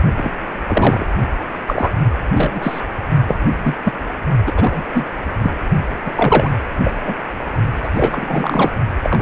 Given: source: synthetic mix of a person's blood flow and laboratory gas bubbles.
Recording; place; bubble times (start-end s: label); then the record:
Doppler ultrasound of blood flow; precordium
0.16-0.32 s: bubbles
0.67-1.05 s: bubbles
1.67-1.93 s: bubbles
2.34-2.81 s: bubbles
3.28-3.36 s: bubbles
3.58-3.75 s: bubbles
3.84-3.93 s: bubbles
4.46-4.53 s: bubbles
4.56-4.83 s: bubbles
4.94-5.05 s: bubbles
5.42-5.54 s: bubbles
6.05-6.11 s: bubbles
6.16-6.50 s: bubbles
6.84-6.92 s: bubbles
7.04-7.14 s: bubbles
7.82-7.88 s: bubbles
7.94-8.72 s: bubbles
9.03-9.22 s: bubbles
From the record:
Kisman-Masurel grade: 233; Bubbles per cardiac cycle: several, 3 to 8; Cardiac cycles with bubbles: 50 to 99%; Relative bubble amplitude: loud (0.450 to 0.775); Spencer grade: 3 (all of the cardiac periods contain showers or single bubble signals, but not dominating or overriding the cardiac motion signals); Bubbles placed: only in the low amplitude regions of the cardiac cycle